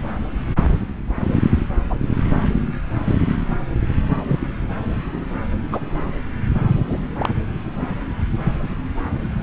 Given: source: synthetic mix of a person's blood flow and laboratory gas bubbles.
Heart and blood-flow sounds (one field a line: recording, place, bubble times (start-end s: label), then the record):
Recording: Doppler ultrasound of blood flow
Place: subclavian vein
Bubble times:
1.89-1.97 s: bubbles
3.06-3.14 s: bubbles
4.29-4.39 s: bubbles
5.72-5.80 s: bubbles
6.87-7.00 s: bubbles
7.17-7.34 s: bubbles
From the record:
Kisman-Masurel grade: 122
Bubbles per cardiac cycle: 1 to 2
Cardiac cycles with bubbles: 10 to 50%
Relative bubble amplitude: moderate (0.250 to 0.450)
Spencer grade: 2 (many but less than half of the cardiac periods contain bubble signals, singularly or in groups)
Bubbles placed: anywhere in the cardiac cycle